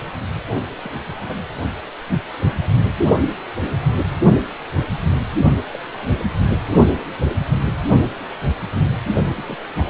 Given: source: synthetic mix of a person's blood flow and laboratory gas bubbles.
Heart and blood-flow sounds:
Doppler ultrasound of blood flow; precordium
0.83-0.92 s: bubbles
1.19-1.44 s: bubbles
5.71-5.79 s: bubbles
5.95-6.27 s: bubbles
9.38-9.56 s: bubbles
9.75-9.90 s: bubbles
From the record:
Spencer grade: 2 (many but less than half of the cardiac periods contain bubble signals, singularly or in groups); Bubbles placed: only in the low amplitude regions of the cardiac cycle

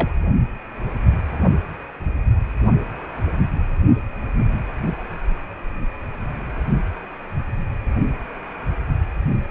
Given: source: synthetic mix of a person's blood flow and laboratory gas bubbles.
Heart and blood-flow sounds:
Doppler ultrasound of blood flow; precordium
0.00-0.14 s: bubbles
From the record:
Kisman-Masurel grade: 212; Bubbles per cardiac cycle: several, 3 to 8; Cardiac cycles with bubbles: 1 to 10%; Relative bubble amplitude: moderate (0.250 to 0.450); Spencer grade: 1 (occasional bubble signal discernible with the cardiac motion signal, with majority of cardiac periods free of bubbles); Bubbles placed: only in the low amplitude regions of the cardiac cycle

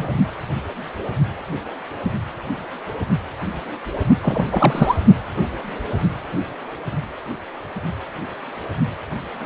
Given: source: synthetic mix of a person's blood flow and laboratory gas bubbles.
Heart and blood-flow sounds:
Doppler ultrasound of blood flow; precordium
0.00-0.10 s: bubbles
4.22-4.96 s: bubbles
From the record:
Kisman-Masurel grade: 223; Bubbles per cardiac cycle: several, 3 to 8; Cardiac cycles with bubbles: 10 to 50%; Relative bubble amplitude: loud (0.450 to 0.775); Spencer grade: 2 (many but less than half of the cardiac periods contain bubble signals, singularly or in groups); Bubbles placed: only in the low amplitude regions of the cardiac cycle

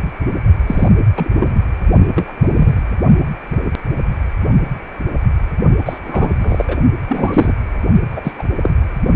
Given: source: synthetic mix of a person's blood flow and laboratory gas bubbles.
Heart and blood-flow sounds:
Doppler ultrasound of blood flow; precordium
0.66-0.89 s: bubbles
1.17-1.30 s: bubbles
1.40-1.57 s: bubbles
2.15-2.33 s: bubbles
2.43-2.48 s: bubbles
2.55-2.82 s: bubbles
5.85-5.99 s: bubbles
6.05-6.29 s: bubbles
6.41-6.65 s: bubbles
6.68-6.77 s: bubbles
7.08-7.54 s: bubbles
8.12-8.20 s: bubbles
8.23-8.33 s: bubbles
8.38-8.44 s: bubbles
8.62-8.72 s: bubbles
From the record:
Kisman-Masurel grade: 223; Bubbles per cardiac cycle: several, 3 to 8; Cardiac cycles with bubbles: 10 to 50%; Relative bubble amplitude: loud (0.450 to 0.775); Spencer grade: 2 (many but less than half of the cardiac periods contain bubble signals, singularly or in groups); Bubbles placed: only in the low amplitude regions of the cardiac cycle

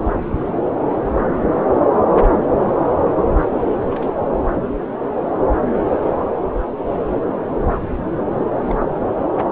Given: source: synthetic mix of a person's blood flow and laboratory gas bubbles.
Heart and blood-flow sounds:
Doppler ultrasound of blood flow; subclavian vein
3.31-3.38 s: bubbles
3.91-4.08 s: bubbles
8.60-8.74 s: bubbles
From the record:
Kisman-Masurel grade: 121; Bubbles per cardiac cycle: 1 to 2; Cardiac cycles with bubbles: 10 to 50%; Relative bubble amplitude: barely perceptible (0.100 to 0.250); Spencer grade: 2 (many but less than half of the cardiac periods contain bubble signals, singularly or in groups); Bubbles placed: anywhere in the cardiac cycle

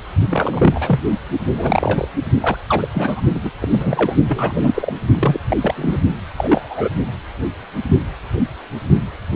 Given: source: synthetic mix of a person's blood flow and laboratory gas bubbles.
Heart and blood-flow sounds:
Doppler ultrasound of blood flow; precordium
0.29-1.00 s: bubbles
1.43-2.08 s: bubbles
2.41-2.58 s: bubbles
2.69-2.88 s: bubbles
2.94-3.21 s: bubbles
3.35-3.40 s: bubbles
3.44-3.51 s: bubbles
3.61-4.14 s: bubbles
4.26-4.93 s: bubbles
5.14-5.40 s: bubbles
5.48-5.57 s: bubbles
5.62-5.98 s: bubbles
6.36-6.90 s: bubbles
From the record:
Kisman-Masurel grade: 232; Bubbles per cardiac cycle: several, 3 to 8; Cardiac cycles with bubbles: 50 to 99%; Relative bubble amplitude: moderate (0.250 to 0.450); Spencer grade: 3 (all of the cardiac periods contain showers or single bubble signals, but not dominating or overriding the cardiac motion signals); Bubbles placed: only in the low amplitude regions of the cardiac cycle

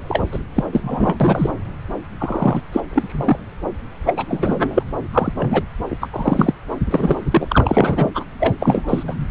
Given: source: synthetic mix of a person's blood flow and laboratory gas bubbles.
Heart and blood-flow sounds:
Doppler ultrasound of blood flow; subclavian vein
0.08-0.22 s: bubbles
0.32-0.38 s: bubbles
0.54-0.65 s: bubbles
0.73-1.17 s: bubbles
1.20-1.53 s: bubbles
2.19-2.61 s: bubbles
2.72-2.80 s: bubbles
2.88-3.39 s: bubbles
4.06-4.13 s: bubbles
4.16-4.83 s: bubbles
5.12-5.32 s: bubbles
5.38-5.63 s: bubbles
5.89-5.96 s: bubbles
6.01-6.10 s: bubbles
6.12-6.52 s: bubbles
6.91-7.16 s: bubbles
7.30-8.10 s: bubbles
8.15-8.24 s: bubbles
8.40-8.54 s: bubbles
8.60-9.03 s: bubbles
9.08-9.16 s: bubbles
From the record:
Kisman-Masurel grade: 243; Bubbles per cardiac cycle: several, 3 to 8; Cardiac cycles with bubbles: 100%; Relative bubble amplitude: loud (0.450 to 0.775); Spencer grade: 3 (all of the cardiac periods contain showers or single bubble signals, but not dominating or overriding the cardiac motion signals); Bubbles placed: anywhere in the cardiac cycle

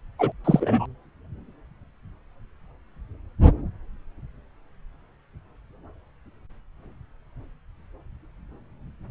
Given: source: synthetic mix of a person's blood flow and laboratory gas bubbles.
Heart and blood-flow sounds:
Doppler ultrasound of blood flow; subclavian vein
0.19-0.32 s: bubbles
0.44-0.86 s: bubbles
From the record:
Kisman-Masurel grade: 223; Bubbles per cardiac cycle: several, 3 to 8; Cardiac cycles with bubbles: 10 to 50%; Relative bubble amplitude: loud (0.450 to 0.775); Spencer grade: 2 (many but less than half of the cardiac periods contain bubble signals, singularly or in groups); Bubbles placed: anywhere in the cardiac cycle

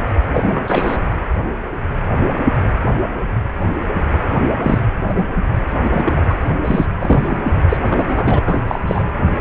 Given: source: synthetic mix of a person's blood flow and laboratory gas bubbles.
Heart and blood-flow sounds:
Doppler ultrasound of blood flow; precordium
0.34-0.98 s: bubbles
4.62-4.83 s: bubbles
5.08-5.26 s: bubbles
5.83-6.35 s: bubbles
6.64-7.38 s: bubbles
7.69-7.78 s: bubbles
7.89-8.39 s: bubbles
8.45-8.63 s: bubbles
8.68-8.79 s: bubbles
8.87-9.04 s: bubbles
From the record:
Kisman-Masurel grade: 233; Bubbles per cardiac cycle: several, 3 to 8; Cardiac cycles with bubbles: 50 to 99%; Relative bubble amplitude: loud (0.450 to 0.775); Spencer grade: 3 (all of the cardiac periods contain showers or single bubble signals, but not dominating or overriding the cardiac motion signals); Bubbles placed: anywhere in the cardiac cycle

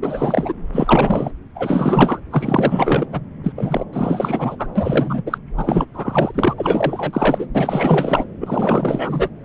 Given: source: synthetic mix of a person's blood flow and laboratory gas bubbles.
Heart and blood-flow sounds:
Doppler ultrasound of blood flow; subclavian vein
0.01-0.53 s: bubbles
0.72-1.31 s: bubbles
1.55-2.20 s: bubbles
2.30-3.06 s: bubbles
3.11-3.20 s: bubbles
3.43-3.52 s: bubbles
3.55-3.84 s: bubbles
3.92-4.56 s: bubbles
4.58-4.67 s: bubbles
4.75-5.23 s: bubbles
5.26-5.38 s: bubbles
5.56-5.85 s: bubbles
5.93-6.31 s: bubbles
6.34-6.54 s: bubbles
6.57-7.46 s: bubbles
7.54-8.26 s: bubbles
8.40-9.29 s: bubbles
From the record:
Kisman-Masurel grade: 444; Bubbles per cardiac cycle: continuous sound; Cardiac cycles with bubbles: 100%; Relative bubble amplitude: maximal (0.775 to 0.999); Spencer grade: 4 (maximum detectable bubble signal sounding continuously throughout systole and diastole of every cardiac period, and overriding the amplitude of the normal cardiac signals); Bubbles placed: anywhere in the cardiac cycle

